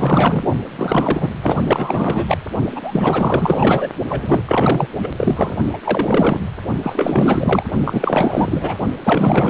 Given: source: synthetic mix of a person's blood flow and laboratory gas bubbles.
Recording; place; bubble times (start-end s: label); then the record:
Doppler ultrasound of blood flow; precordium
0.00-0.44 s: bubbles
0.76-1.30 s: bubbles
1.42-2.38 s: bubbles
2.75-3.88 s: bubbles
4.08-4.40 s: bubbles
4.45-4.87 s: bubbles
4.99-5.11 s: bubbles
5.17-5.57 s: bubbles
5.72-5.79 s: bubbles
5.84-6.41 s: bubbles
6.82-7.63 s: bubbles
7.84-8.77 s: bubbles
9.04-9.49 s: bubbles
From the record:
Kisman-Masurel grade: 444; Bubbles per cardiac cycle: continuous sound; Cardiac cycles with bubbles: 100%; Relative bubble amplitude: maximal (0.775 to 0.999); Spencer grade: 4 (maximum detectable bubble signal sounding continuously throughout systole and diastole of every cardiac period, and overriding the amplitude of the normal cardiac signals); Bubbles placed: only in the low amplitude regions of the cardiac cycle